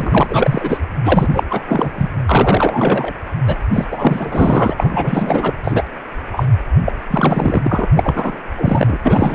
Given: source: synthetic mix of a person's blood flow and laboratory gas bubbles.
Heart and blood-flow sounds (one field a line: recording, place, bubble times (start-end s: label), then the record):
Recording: Doppler ultrasound of blood flow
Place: precordium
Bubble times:
0.00-0.77 s: bubbles
1.04-1.44 s: bubbles
1.49-1.62 s: bubbles
1.67-2.10 s: bubbles
2.27-3.13 s: bubbles
3.47-3.57 s: bubbles
3.72-3.85 s: bubbles
3.91-4.75 s: bubbles
4.77-5.54 s: bubbles
5.63-5.83 s: bubbles
6.33-6.46 s: bubbles
6.85-6.92 s: bubbles
7.10-7.86 s: bubbles
7.96-8.39 s: bubbles
8.56-8.98 s: bubbles
9.03-9.35 s: bubbles
From the record:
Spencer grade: 4 (maximum detectable bubble signal sounding continuously throughout systole and diastole of every cardiac period, and overriding the amplitude of the normal cardiac signals)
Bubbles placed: anywhere in the cardiac cycle